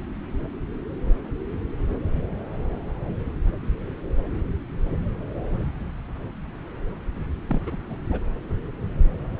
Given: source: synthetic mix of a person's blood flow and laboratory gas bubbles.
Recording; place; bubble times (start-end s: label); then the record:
Doppler ultrasound of blood flow; subclavian vein
7.47-7.60 s: bubbles
7.66-7.78 s: bubbles
7.90-7.96 s: bubbles
8.10-8.21 s: bubbles
From the record:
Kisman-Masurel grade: 222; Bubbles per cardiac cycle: several, 3 to 8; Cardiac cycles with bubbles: 10 to 50%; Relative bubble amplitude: moderate (0.250 to 0.450); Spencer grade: 2 (many but less than half of the cardiac periods contain bubble signals, singularly or in groups); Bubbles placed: anywhere in the cardiac cycle